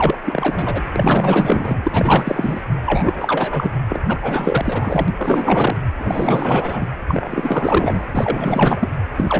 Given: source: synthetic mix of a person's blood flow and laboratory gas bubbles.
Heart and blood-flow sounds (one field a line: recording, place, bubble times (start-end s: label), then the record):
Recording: Doppler ultrasound of blood flow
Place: precordium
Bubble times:
0.00-0.16 s: bubbles
0.24-0.81 s: bubbles
0.95-2.61 s: bubbles
2.85-3.72 s: bubbles
3.89-4.04 s: bubbles
4.08-5.13 s: bubbles
5.18-5.77 s: bubbles
5.98-6.87 s: bubbles
7.07-8.05 s: bubbles
8.12-8.88 s: bubbles
9.16-9.40 s: bubbles
From the record:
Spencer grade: 4 (maximum detectable bubble signal sounding continuously throughout systole and diastole of every cardiac period, and overriding the amplitude of the normal cardiac signals)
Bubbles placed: anywhere in the cardiac cycle